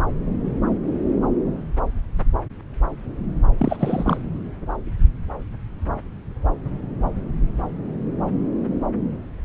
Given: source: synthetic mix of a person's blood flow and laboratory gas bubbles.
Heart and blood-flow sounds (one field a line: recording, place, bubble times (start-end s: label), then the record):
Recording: Doppler ultrasound of blood flow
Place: subclavian vein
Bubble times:
3.58-4.21 s: bubbles
From the record:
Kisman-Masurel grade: 213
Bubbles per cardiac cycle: several, 3 to 8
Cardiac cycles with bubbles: 1 to 10%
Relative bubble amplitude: loud (0.450 to 0.775)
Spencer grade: 1 (occasional bubble signal discernible with the cardiac motion signal, with majority of cardiac periods free of bubbles)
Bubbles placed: anywhere in the cardiac cycle